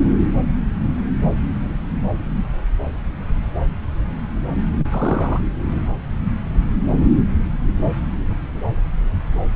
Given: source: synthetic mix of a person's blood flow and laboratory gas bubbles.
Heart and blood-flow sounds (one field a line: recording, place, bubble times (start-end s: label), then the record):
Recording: Doppler ultrasound of blood flow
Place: subclavian vein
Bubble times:
4.78-4.86 s: bubbles
4.90-5.40 s: bubbles
From the record:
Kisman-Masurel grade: 211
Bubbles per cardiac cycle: several, 3 to 8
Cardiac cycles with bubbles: 1 to 10%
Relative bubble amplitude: barely perceptible (0.100 to 0.250)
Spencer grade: 1 (occasional bubble signal discernible with the cardiac motion signal, with majority of cardiac periods free of bubbles)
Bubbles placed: anywhere in the cardiac cycle